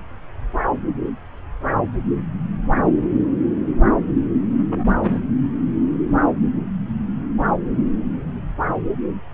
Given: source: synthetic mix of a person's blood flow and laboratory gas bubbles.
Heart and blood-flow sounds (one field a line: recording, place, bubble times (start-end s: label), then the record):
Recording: Doppler ultrasound of blood flow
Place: subclavian vein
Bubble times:
4.69-5.21 s: bubbles
From the record:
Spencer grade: 2 (many but less than half of the cardiac periods contain bubble signals, singularly or in groups)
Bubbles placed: anywhere in the cardiac cycle